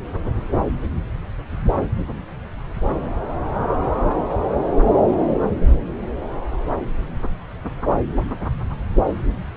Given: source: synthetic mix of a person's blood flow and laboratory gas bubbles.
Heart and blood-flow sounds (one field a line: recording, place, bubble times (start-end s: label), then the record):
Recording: Doppler ultrasound of blood flow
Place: subclavian vein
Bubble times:
no bubbles
From the record:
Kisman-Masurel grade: 000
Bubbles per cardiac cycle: 0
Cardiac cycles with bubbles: 0%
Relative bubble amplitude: no bubbles discernible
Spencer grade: 0 (complete lack of bubble signals)